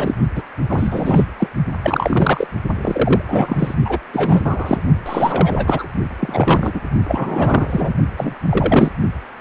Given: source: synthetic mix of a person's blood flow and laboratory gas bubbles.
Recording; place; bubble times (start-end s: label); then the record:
Doppler ultrasound of blood flow; precordium
0.00-0.14 s: bubbles
0.35-0.43 s: bubbles
0.69-1.25 s: bubbles
1.39-1.48 s: bubbles
1.82-2.47 s: bubbles
2.82-3.22 s: bubbles
3.26-3.75 s: bubbles
3.85-3.99 s: bubbles
4.13-4.42 s: bubbles
4.44-4.83 s: bubbles
5.06-5.88 s: bubbles
6.20-6.71 s: bubbles
6.74-6.81 s: bubbles
7.08-7.94 s: bubbles
8.17-8.34 s: bubbles
8.49-8.90 s: bubbles
From the record:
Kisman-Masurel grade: 333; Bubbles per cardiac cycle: rolling drumbeat, 9 or more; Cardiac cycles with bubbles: 50 to 99%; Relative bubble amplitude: loud (0.450 to 0.775); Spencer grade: 3 (all of the cardiac periods contain showers or single bubble signals, but not dominating or overriding the cardiac motion signals); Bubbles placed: only in the low amplitude regions of the cardiac cycle